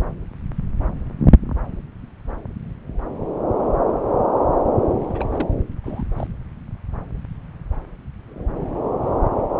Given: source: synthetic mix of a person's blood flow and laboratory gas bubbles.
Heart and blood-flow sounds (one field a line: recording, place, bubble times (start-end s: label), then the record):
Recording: Doppler ultrasound of blood flow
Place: subclavian vein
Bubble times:
5.07-5.25 s: bubbles
5.32-5.49 s: bubbles
5.83-6.04 s: bubbles
6.16-6.27 s: bubbles
From the record:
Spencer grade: 1 (occasional bubble signal discernible with the cardiac motion signal, with majority of cardiac periods free of bubbles)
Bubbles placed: anywhere in the cardiac cycle